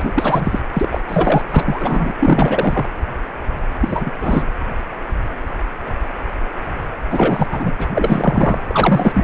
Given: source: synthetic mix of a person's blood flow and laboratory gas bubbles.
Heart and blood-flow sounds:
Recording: Doppler ultrasound of blood flow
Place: precordium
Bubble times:
0.00-0.60 s: bubbles
0.73-1.01 s: bubbles
1.08-1.42 s: bubbles
1.49-2.14 s: bubbles
2.19-2.85 s: bubbles
3.79-4.12 s: bubbles
4.20-4.46 s: bubbles
7.11-7.71 s: bubbles
7.79-7.88 s: bubbles
7.95-8.61 s: bubbles
8.67-9.24 s: bubbles
From the record:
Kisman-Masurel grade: 333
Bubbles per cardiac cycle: rolling drumbeat, 9 or more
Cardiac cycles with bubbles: 50 to 99%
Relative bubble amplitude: loud (0.450 to 0.775)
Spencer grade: 3 (all of the cardiac periods contain showers or single bubble signals, but not dominating or overriding the cardiac motion signals)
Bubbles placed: anywhere in the cardiac cycle

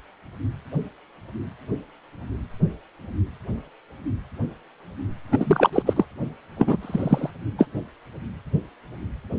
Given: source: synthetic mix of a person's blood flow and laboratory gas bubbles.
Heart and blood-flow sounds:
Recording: Doppler ultrasound of blood flow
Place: precordium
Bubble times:
5.31-5.69 s: bubbles
5.72-5.83 s: bubbles
5.85-5.93 s: bubbles
5.96-6.05 s: bubbles
6.58-6.77 s: bubbles
6.81-7.30 s: bubbles
7.58-7.66 s: bubbles
From the record:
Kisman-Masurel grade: 223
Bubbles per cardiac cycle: several, 3 to 8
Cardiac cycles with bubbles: 10 to 50%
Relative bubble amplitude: loud (0.450 to 0.775)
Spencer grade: 2 (many but less than half of the cardiac periods contain bubble signals, singularly or in groups)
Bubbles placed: anywhere in the cardiac cycle

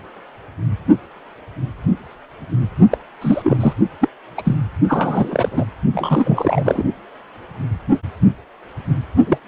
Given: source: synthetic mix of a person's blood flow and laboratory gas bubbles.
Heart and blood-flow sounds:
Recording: Doppler ultrasound of blood flow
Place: precordium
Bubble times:
2.90-2.98 s: bubbles
3.21-3.57 s: bubbles
3.60-3.73 s: bubbles
4.01-4.08 s: bubbles
4.38-4.42 s: bubbles
4.45-4.58 s: bubbles
4.88-5.64 s: bubbles
5.92-6.83 s: bubbles
9.27-9.38 s: bubbles
From the record:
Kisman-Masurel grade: 233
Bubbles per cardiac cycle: several, 3 to 8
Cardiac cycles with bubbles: 50 to 99%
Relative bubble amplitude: loud (0.450 to 0.775)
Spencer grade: 3 (all of the cardiac periods contain showers or single bubble signals, but not dominating or overriding the cardiac motion signals)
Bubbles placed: only in the low amplitude regions of the cardiac cycle

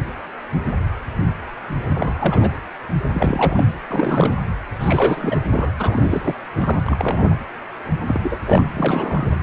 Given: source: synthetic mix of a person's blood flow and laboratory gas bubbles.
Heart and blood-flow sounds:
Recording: Doppler ultrasound of blood flow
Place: precordium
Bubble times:
1.95-2.51 s: bubbles
3.12-3.66 s: bubbles
3.88-4.34 s: bubbles
4.81-5.41 s: bubbles
5.49-5.72 s: bubbles
5.79-6.34 s: bubbles
6.55-6.81 s: bubbles
6.86-7.36 s: bubbles
8.06-8.20 s: bubbles
8.22-8.39 s: bubbles
8.46-8.64 s: bubbles
8.76-9.28 s: bubbles
From the record:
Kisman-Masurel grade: 332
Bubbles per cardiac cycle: rolling drumbeat, 9 or more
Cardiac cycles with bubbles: 50 to 99%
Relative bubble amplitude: moderate (0.250 to 0.450)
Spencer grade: 3 (all of the cardiac periods contain showers or single bubble signals, but not dominating or overriding the cardiac motion signals)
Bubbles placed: anywhere in the cardiac cycle

